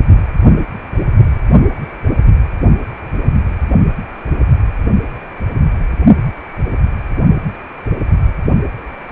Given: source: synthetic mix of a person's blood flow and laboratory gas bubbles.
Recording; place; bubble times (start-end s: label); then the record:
Doppler ultrasound of blood flow; precordium
9.09-9.11 s: bubbles
From the record:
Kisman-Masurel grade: 113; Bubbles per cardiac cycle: 1 to 2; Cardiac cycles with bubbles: 1 to 10%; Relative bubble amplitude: loud (0.450 to 0.775); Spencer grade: 1 (occasional bubble signal discernible with the cardiac motion signal, with majority of cardiac periods free of bubbles); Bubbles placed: only in the low amplitude regions of the cardiac cycle